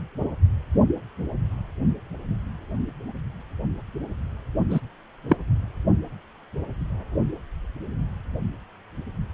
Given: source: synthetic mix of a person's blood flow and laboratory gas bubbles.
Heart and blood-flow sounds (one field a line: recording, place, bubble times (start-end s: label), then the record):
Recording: Doppler ultrasound of blood flow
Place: precordium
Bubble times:
4.70-4.80 s: bubbles
5.29-5.36 s: bubbles
From the record:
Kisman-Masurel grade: 113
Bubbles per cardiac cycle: 1 to 2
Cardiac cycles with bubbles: 1 to 10%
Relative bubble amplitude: loud (0.450 to 0.775)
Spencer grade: 1 (occasional bubble signal discernible with the cardiac motion signal, with majority of cardiac periods free of bubbles)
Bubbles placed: only in the low amplitude regions of the cardiac cycle